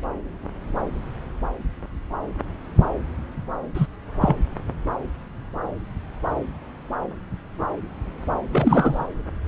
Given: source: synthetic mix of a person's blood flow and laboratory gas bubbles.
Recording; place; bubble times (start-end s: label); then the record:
Doppler ultrasound of blood flow; subclavian vein
3.75-3.87 s: bubbles
4.21-4.36 s: bubbles
8.52-9.07 s: bubbles
From the record:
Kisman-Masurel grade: 223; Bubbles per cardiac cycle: several, 3 to 8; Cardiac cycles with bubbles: 10 to 50%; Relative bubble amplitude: loud (0.450 to 0.775); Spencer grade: 2 (many but less than half of the cardiac periods contain bubble signals, singularly or in groups); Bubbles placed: anywhere in the cardiac cycle